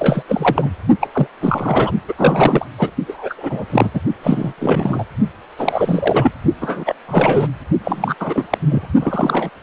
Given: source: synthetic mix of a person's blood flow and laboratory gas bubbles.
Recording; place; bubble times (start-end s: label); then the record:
Doppler ultrasound of blood flow; precordium
0.00-0.23 s: bubbles
0.27-0.70 s: bubbles
1.01-1.08 s: bubbles
1.14-1.27 s: bubbles
1.40-1.92 s: bubbles
2.08-2.14 s: bubbles
2.18-2.66 s: bubbles
2.78-2.91 s: bubbles
3.08-3.34 s: bubbles
3.38-3.65 s: bubbles
3.70-3.91 s: bubbles
3.94-4.00 s: bubbles
4.22-4.53 s: bubbles
4.58-5.04 s: bubbles
5.57-6.31 s: bubbles
6.61-6.94 s: bubbles
7.07-7.47 s: bubbles
7.84-8.14 s: bubbles
8.20-8.46 s: bubbles
8.50-8.58 s: bubbles
8.70-8.86 s: bubbles
9.00-9.49 s: bubbles
From the record:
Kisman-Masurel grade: 343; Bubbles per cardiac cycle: rolling drumbeat, 9 or more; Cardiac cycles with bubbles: 100%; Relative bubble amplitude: loud (0.450 to 0.775); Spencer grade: 3 (all of the cardiac periods contain showers or single bubble signals, but not dominating or overriding the cardiac motion signals); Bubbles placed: only in the low amplitude regions of the cardiac cycle